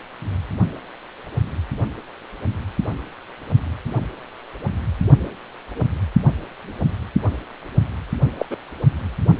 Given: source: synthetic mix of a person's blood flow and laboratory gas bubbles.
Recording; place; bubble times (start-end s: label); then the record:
Doppler ultrasound of blood flow; precordium
8.38-8.46 s: bubbles
8.51-8.55 s: bubbles
From the record:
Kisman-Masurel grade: 112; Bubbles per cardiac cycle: 1 to 2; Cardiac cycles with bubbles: 1 to 10%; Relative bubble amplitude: moderate (0.250 to 0.450); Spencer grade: 1 (occasional bubble signal discernible with the cardiac motion signal, with majority of cardiac periods free of bubbles); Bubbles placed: only in the low amplitude regions of the cardiac cycle